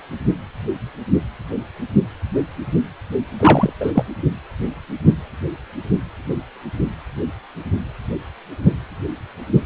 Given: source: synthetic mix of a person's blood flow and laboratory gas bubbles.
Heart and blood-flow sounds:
Doppler ultrasound of blood flow; precordium
3.40-3.73 s: bubbles
3.80-3.92 s: bubbles
3.95-4.04 s: bubbles
From the record:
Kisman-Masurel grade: 213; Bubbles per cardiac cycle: several, 3 to 8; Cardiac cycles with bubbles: 1 to 10%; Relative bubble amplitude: loud (0.450 to 0.775); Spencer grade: 1 (occasional bubble signal discernible with the cardiac motion signal, with majority of cardiac periods free of bubbles); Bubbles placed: anywhere in the cardiac cycle

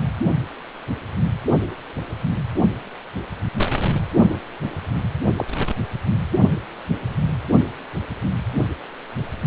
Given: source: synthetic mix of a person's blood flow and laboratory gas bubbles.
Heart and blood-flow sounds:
Doppler ultrasound of blood flow; precordium
5.38-5.45 s: bubbles
From the record:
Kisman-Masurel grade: 112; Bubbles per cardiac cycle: 1 to 2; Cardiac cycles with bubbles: 1 to 10%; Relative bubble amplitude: moderate (0.250 to 0.450); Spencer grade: 1 (occasional bubble signal discernible with the cardiac motion signal, with majority of cardiac periods free of bubbles); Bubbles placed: anywhere in the cardiac cycle

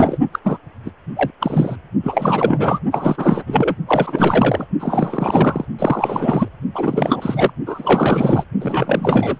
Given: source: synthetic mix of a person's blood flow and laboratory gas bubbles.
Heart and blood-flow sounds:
Doppler ultrasound of blood flow; precordium
0.00-0.18 s: bubbles
0.32-0.40 s: bubbles
0.44-0.58 s: bubbles
0.85-0.90 s: bubbles
1.16-1.31 s: bubbles
1.40-1.76 s: bubbles
2.03-2.79 s: bubbles
2.92-3.44 s: bubbles
3.47-3.76 s: bubbles
3.87-4.65 s: bubbles
4.79-5.65 s: bubbles
5.78-6.48 s: bubbles
6.74-7.50 s: bubbles
7.65-8.45 s: bubbles
8.60-9.38 s: bubbles
From the record:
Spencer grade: 4 (maximum detectable bubble signal sounding continuously throughout systole and diastole of every cardiac period, and overriding the amplitude of the normal cardiac signals); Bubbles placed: only in the low amplitude regions of the cardiac cycle

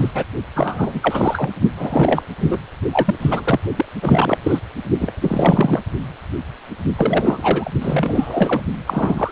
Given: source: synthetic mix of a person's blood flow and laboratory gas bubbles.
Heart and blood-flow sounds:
Doppler ultrasound of blood flow; precordium
0.00-0.11 s: bubbles
0.15-0.24 s: bubbles
0.55-1.50 s: bubbles
1.77-2.23 s: bubbles
2.40-2.58 s: bubbles
2.92-3.15 s: bubbles
3.19-3.59 s: bubbles
3.76-3.86 s: bubbles
4.01-4.38 s: bubbles
4.42-4.59 s: bubbles
4.99-5.13 s: bubbles
5.21-5.82 s: bubbles
6.96-7.71 s: bubbles
7.81-8.61 s: bubbles
8.87-9.32 s: bubbles
From the record:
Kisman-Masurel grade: 333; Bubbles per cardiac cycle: rolling drumbeat, 9 or more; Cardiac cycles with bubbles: 50 to 99%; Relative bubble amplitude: loud (0.450 to 0.775); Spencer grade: 3 (all of the cardiac periods contain showers or single bubble signals, but not dominating or overriding the cardiac motion signals); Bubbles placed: only in the low amplitude regions of the cardiac cycle

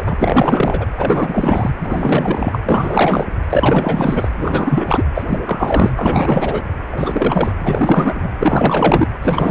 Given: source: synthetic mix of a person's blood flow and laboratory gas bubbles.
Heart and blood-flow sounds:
Doppler ultrasound of blood flow; precordium
0.00-0.86 s: bubbles
0.97-1.71 s: bubbles
1.78-2.60 s: bubbles
2.63-3.25 s: bubbles
3.49-4.29 s: bubbles
4.37-5.04 s: bubbles
5.14-5.23 s: bubbles
5.26-5.41 s: bubbles
5.45-5.91 s: bubbles
5.97-6.64 s: bubbles
6.92-7.53 s: bubbles
7.63-8.30 s: bubbles
8.40-9.08 s: bubbles
9.23-9.51 s: bubbles
From the record:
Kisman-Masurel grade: 444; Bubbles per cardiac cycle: continuous sound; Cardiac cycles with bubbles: 100%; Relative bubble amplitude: maximal (0.775 to 0.999); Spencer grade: 4 (maximum detectable bubble signal sounding continuously throughout systole and diastole of every cardiac period, and overriding the amplitude of the normal cardiac signals); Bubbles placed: anywhere in the cardiac cycle

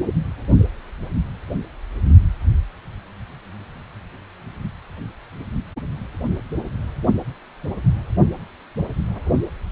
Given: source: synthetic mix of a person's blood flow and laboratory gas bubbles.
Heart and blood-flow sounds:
Doppler ultrasound of blood flow; precordium
6.28-6.41 s: bubbles
From the record:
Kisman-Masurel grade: 111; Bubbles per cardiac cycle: 1 to 2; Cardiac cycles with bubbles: 1 to 10%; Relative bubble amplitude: barely perceptible (0.100 to 0.250); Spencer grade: 1 (occasional bubble signal discernible with the cardiac motion signal, with majority of cardiac periods free of bubbles); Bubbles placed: only in the low amplitude regions of the cardiac cycle

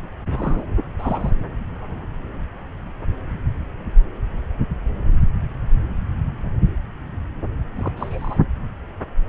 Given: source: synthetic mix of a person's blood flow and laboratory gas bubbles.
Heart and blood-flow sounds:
Doppler ultrasound of blood flow; subclavian vein
0.27-0.63 s: bubbles
0.99-1.47 s: bubbles
7.75-7.92 s: bubbles
7.96-8.38 s: bubbles
From the record:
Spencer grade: 2 (many but less than half of the cardiac periods contain bubble signals, singularly or in groups); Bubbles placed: anywhere in the cardiac cycle

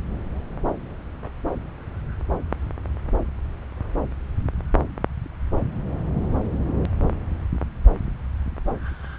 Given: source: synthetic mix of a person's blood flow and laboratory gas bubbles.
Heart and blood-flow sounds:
Doppler ultrasound of blood flow; subclavian vein
no bubbles
From the record:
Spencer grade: 0 (complete lack of bubble signals)

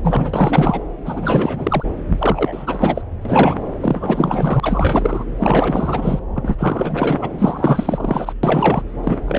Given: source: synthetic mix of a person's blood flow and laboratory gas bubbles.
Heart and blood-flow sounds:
Doppler ultrasound of blood flow; subclavian vein
0.02-0.82 s: bubbles
1.05-1.84 s: bubbles
2.10-3.01 s: bubbles
3.25-3.55 s: bubbles
3.80-5.25 s: bubbles
5.38-6.19 s: bubbles
6.34-7.18 s: bubbles
7.21-7.29 s: bubbles
7.38-8.34 s: bubbles
8.43-8.82 s: bubbles
9.04-9.18 s: bubbles
9.26-9.39 s: bubbles
From the record:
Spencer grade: 4 (maximum detectable bubble signal sounding continuously throughout systole and diastole of every cardiac period, and overriding the amplitude of the normal cardiac signals); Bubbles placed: anywhere in the cardiac cycle

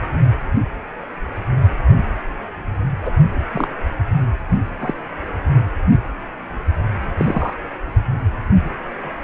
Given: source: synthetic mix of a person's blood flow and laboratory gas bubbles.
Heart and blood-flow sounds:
Doppler ultrasound of blood flow; precordium
3.05-3.12 s: bubbles
3.53-3.67 s: bubbles
4.80-4.93 s: bubbles
7.17-7.54 s: bubbles
From the record:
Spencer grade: 2 (many but less than half of the cardiac periods contain bubble signals, singularly or in groups); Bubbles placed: anywhere in the cardiac cycle

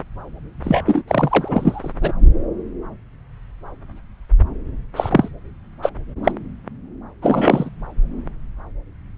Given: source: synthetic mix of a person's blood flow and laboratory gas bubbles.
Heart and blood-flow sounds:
Doppler ultrasound of blood flow; subclavian vein
0.63-1.03 s: bubbles
1.08-1.93 s: bubbles
2.01-2.12 s: bubbles
4.96-5.29 s: bubbles
5.82-5.90 s: bubbles
6.23-6.31 s: bubbles
7.21-7.69 s: bubbles
From the record:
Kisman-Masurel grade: 223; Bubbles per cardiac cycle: several, 3 to 8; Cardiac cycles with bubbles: 10 to 50%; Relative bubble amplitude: loud (0.450 to 0.775); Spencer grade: 2 (many but less than half of the cardiac periods contain bubble signals, singularly or in groups); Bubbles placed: anywhere in the cardiac cycle

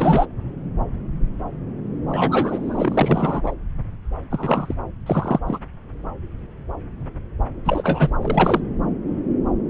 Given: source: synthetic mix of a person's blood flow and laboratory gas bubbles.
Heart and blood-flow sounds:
Doppler ultrasound of blood flow; subclavian vein
0.00-0.26 s: bubbles
2.08-3.53 s: bubbles
4.30-4.75 s: bubbles
5.06-5.39 s: bubbles
5.46-5.58 s: bubbles
7.65-8.10 s: bubbles
8.22-8.61 s: bubbles
From the record:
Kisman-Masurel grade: 222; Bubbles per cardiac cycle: several, 3 to 8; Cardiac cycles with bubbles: 10 to 50%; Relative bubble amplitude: moderate (0.250 to 0.450); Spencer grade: 2 (many but less than half of the cardiac periods contain bubble signals, singularly or in groups); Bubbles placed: anywhere in the cardiac cycle

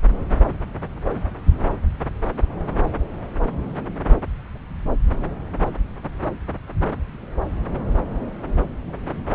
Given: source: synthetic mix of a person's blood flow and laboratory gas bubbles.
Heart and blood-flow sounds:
Doppler ultrasound of blood flow; subclavian vein
8.86-8.92 s: bubbles
From the record:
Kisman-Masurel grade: 111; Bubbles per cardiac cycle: 1 to 2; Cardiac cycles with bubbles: 1 to 10%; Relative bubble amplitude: barely perceptible (0.100 to 0.250); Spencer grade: 1 (occasional bubble signal discernible with the cardiac motion signal, with majority of cardiac periods free of bubbles); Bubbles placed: anywhere in the cardiac cycle

